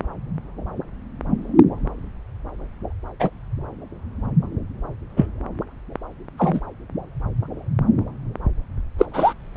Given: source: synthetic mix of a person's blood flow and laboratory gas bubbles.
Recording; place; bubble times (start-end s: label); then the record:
Doppler ultrasound of blood flow; subclavian vein
3.19-3.30 s: bubbles
5.16-5.26 s: bubbles
6.38-6.61 s: bubbles
8.98-9.05 s: bubbles
9.13-9.34 s: bubbles
From the record:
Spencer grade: 2 (many but less than half of the cardiac periods contain bubble signals, singularly or in groups); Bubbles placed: anywhere in the cardiac cycle